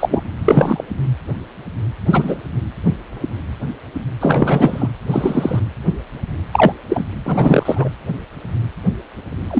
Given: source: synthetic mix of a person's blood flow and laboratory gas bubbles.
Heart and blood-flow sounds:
Doppler ultrasound of blood flow; precordium
0.00-0.21 s: bubbles
0.44-0.84 s: bubbles
2.05-2.38 s: bubbles
4.21-4.88 s: bubbles
5.11-5.60 s: bubbles
6.53-6.72 s: bubbles
6.89-7.05 s: bubbles
7.25-7.88 s: bubbles
9.50-9.60 s: bubbles
From the record:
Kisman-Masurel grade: 233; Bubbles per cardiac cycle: several, 3 to 8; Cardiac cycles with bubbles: 50 to 99%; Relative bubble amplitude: loud (0.450 to 0.775); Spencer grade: 3 (all of the cardiac periods contain showers or single bubble signals, but not dominating or overriding the cardiac motion signals); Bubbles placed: anywhere in the cardiac cycle

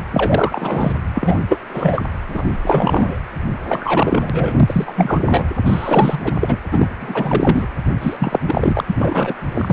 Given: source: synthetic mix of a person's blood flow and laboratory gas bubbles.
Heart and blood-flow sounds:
Doppler ultrasound of blood flow; precordium
0.11-0.92 s: bubbles
1.14-1.40 s: bubbles
1.48-2.03 s: bubbles
2.28-2.57 s: bubbles
2.65-3.19 s: bubbles
3.69-5.21 s: bubbles
5.25-5.44 s: bubbles
5.65-6.19 s: bubbles
6.23-6.33 s: bubbles
6.40-6.58 s: bubbles
6.71-7.67 s: bubbles
8.01-8.40 s: bubbles
8.47-8.83 s: bubbles
8.87-9.35 s: bubbles
9.54-9.73 s: bubbles
From the record:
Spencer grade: 3 (all of the cardiac periods contain showers or single bubble signals, but not dominating or overriding the cardiac motion signals); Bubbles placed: anywhere in the cardiac cycle

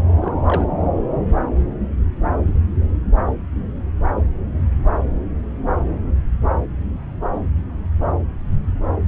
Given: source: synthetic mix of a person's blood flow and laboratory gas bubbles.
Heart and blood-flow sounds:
Doppler ultrasound of blood flow; subclavian vein
0.22-0.67 s: bubbles
From the record:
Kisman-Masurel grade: 211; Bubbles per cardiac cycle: several, 3 to 8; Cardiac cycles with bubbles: 1 to 10%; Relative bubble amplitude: barely perceptible (0.100 to 0.250); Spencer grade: 1 (occasional bubble signal discernible with the cardiac motion signal, with majority of cardiac periods free of bubbles); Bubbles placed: anywhere in the cardiac cycle

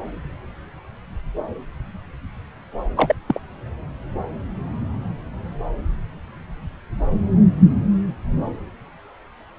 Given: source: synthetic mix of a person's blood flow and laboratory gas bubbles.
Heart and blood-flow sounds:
Doppler ultrasound of blood flow; subclavian vein
2.96-3.16 s: bubbles
3.27-3.40 s: bubbles
From the record:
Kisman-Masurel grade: 212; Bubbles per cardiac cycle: several, 3 to 8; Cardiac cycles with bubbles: 1 to 10%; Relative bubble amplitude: moderate (0.250 to 0.450); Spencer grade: 1 (occasional bubble signal discernible with the cardiac motion signal, with majority of cardiac periods free of bubbles); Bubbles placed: anywhere in the cardiac cycle

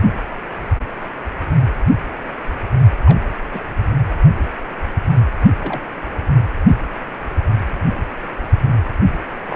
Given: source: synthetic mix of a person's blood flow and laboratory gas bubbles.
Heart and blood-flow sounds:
Doppler ultrasound of blood flow; precordium
3.00-3.23 s: bubbles
3.54-3.62 s: bubbles
5.58-5.81 s: bubbles
9.52-9.56 s: bubbles
From the record:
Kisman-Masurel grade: 121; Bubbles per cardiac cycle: 1 to 2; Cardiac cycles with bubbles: 10 to 50%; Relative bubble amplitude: barely perceptible (0.100 to 0.250); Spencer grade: 2 (many but less than half of the cardiac periods contain bubble signals, singularly or in groups); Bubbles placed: only in the low amplitude regions of the cardiac cycle

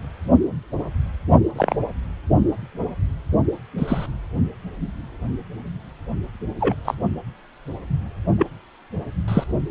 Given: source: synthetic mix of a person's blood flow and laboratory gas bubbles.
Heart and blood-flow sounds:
Doppler ultrasound of blood flow; precordium
1.55-1.76 s: bubbles
3.78-4.06 s: bubbles
6.60-6.75 s: bubbles
6.84-6.95 s: bubbles
8.38-8.46 s: bubbles
9.28-9.44 s: bubbles
From the record:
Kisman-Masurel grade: 122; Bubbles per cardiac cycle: 1 to 2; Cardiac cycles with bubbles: 10 to 50%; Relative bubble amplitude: moderate (0.250 to 0.450); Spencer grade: 2 (many but less than half of the cardiac periods contain bubble signals, singularly or in groups); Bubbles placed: only in the low amplitude regions of the cardiac cycle

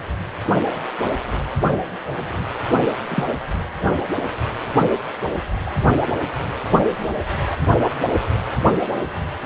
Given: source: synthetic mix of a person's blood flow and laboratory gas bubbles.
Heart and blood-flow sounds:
Doppler ultrasound of blood flow; precordium
3.10-3.25 s: bubbles
5.67-5.71 s: bubbles
From the record:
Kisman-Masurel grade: 122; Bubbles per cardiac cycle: 1 to 2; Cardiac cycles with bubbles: 10 to 50%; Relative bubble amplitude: moderate (0.250 to 0.450); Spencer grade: 2 (many but less than half of the cardiac periods contain bubble signals, singularly or in groups); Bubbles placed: anywhere in the cardiac cycle

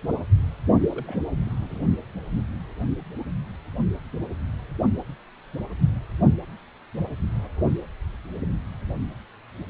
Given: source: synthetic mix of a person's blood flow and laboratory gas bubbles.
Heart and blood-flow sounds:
Doppler ultrasound of blood flow; precordium
0.81-1.16 s: bubbles
1.46-1.79 s: bubbles
From the record:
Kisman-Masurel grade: 211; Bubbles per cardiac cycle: several, 3 to 8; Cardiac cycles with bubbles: 1 to 10%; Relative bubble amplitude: barely perceptible (0.100 to 0.250); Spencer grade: 1 (occasional bubble signal discernible with the cardiac motion signal, with majority of cardiac periods free of bubbles); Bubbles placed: only in the low amplitude regions of the cardiac cycle

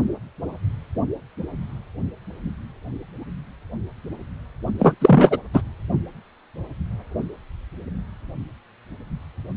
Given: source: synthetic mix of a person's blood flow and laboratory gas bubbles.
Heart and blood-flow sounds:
Doppler ultrasound of blood flow; precordium
4.78-4.94 s: bubbles
5.01-5.38 s: bubbles
5.53-5.61 s: bubbles
From the record:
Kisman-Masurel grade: 213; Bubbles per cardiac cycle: several, 3 to 8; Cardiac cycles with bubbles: 1 to 10%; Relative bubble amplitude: loud (0.450 to 0.775); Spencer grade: 1 (occasional bubble signal discernible with the cardiac motion signal, with majority of cardiac periods free of bubbles); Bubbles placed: only in the low amplitude regions of the cardiac cycle

